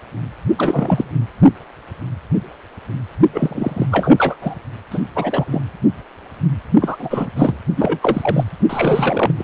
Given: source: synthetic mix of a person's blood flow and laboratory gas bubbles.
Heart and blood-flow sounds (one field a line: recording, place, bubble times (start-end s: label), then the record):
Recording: Doppler ultrasound of blood flow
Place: precordium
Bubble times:
0.57-1.10 s: bubbles
3.33-3.86 s: bubbles
3.91-4.37 s: bubbles
4.42-4.54 s: bubbles
4.91-4.99 s: bubbles
5.15-5.62 s: bubbles
6.81-7.28 s: bubbles
7.36-7.57 s: bubbles
7.76-8.44 s: bubbles
8.69-9.31 s: bubbles
9.38-9.43 s: bubbles
From the record:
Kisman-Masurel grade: 333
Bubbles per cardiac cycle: rolling drumbeat, 9 or more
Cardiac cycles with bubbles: 50 to 99%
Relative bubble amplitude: loud (0.450 to 0.775)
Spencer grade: 3 (all of the cardiac periods contain showers or single bubble signals, but not dominating or overriding the cardiac motion signals)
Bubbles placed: only in the low amplitude regions of the cardiac cycle